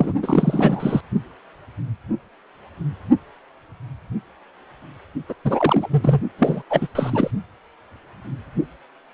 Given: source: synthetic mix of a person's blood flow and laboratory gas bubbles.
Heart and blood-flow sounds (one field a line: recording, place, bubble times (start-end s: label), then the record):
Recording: Doppler ultrasound of blood flow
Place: precordium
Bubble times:
0.00-0.12 s: bubbles
0.22-1.01 s: bubbles
5.29-5.34 s: bubbles
5.44-5.88 s: bubbles
5.91-6.20 s: bubbles
6.39-6.62 s: bubbles
6.70-6.88 s: bubbles
6.95-7.31 s: bubbles
From the record:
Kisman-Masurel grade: 333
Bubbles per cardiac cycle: rolling drumbeat, 9 or more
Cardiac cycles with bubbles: 50 to 99%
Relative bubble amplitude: loud (0.450 to 0.775)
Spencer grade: 3 (all of the cardiac periods contain showers or single bubble signals, but not dominating or overriding the cardiac motion signals)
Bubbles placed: only in the low amplitude regions of the cardiac cycle